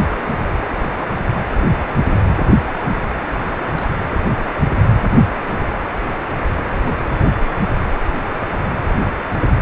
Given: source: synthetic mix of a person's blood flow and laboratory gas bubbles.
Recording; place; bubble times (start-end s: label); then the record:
Doppler ultrasound of blood flow; precordium
2.59-2.77 s: bubbles
3.15-3.46 s: bubbles
3.65-3.89 s: bubbles
From the record:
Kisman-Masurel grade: 211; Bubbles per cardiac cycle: several, 3 to 8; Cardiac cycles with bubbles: 1 to 10%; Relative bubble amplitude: barely perceptible (0.100 to 0.250); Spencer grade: 1 (occasional bubble signal discernible with the cardiac motion signal, with majority of cardiac periods free of bubbles); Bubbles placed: anywhere in the cardiac cycle